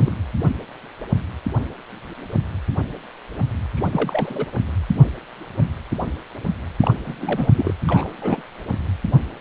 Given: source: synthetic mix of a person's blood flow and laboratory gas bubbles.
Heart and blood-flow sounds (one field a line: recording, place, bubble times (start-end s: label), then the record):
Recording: Doppler ultrasound of blood flow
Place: precordium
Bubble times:
0.00-0.15 s: bubbles
3.77-3.89 s: bubbles
3.91-4.46 s: bubbles
6.80-6.95 s: bubbles
7.05-7.48 s: bubbles
7.54-7.74 s: bubbles
7.87-8.11 s: bubbles
8.21-8.42 s: bubbles
From the record:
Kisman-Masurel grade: 221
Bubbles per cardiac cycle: several, 3 to 8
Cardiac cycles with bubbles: 10 to 50%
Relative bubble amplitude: barely perceptible (0.100 to 0.250)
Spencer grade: 2 (many but less than half of the cardiac periods contain bubble signals, singularly or in groups)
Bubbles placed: anywhere in the cardiac cycle